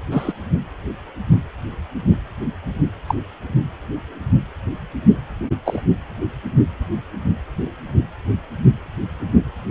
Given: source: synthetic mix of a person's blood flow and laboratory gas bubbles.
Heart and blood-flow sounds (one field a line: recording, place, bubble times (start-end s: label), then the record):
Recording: Doppler ultrasound of blood flow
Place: precordium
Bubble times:
0.11-0.32 s: bubbles
3.06-3.15 s: bubbles
5.65-5.82 s: bubbles
From the record:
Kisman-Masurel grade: 123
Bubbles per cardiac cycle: 1 to 2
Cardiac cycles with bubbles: 10 to 50%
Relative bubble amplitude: loud (0.450 to 0.775)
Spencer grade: 2 (many but less than half of the cardiac periods contain bubble signals, singularly or in groups)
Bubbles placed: anywhere in the cardiac cycle